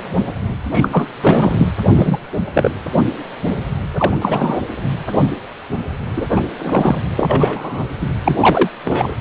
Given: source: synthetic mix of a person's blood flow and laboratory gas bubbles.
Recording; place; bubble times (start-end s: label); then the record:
Doppler ultrasound of blood flow; precordium
0.71-0.89 s: bubbles
0.92-1.07 s: bubbles
1.21-1.66 s: bubbles
1.95-2.17 s: bubbles
2.53-2.69 s: bubbles
3.96-4.58 s: bubbles
6.16-6.26 s: bubbles
6.30-6.42 s: bubbles
6.58-6.98 s: bubbles
7.17-7.86 s: bubbles
8.01-8.08 s: bubbles
8.25-8.38 s: bubbles
8.41-8.69 s: bubbles
8.84-9.14 s: bubbles
From the record:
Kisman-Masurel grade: 233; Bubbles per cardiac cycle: several, 3 to 8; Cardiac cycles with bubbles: 50 to 99%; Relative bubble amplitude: loud (0.450 to 0.775); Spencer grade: 3 (all of the cardiac periods contain showers or single bubble signals, but not dominating or overriding the cardiac motion signals); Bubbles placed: anywhere in the cardiac cycle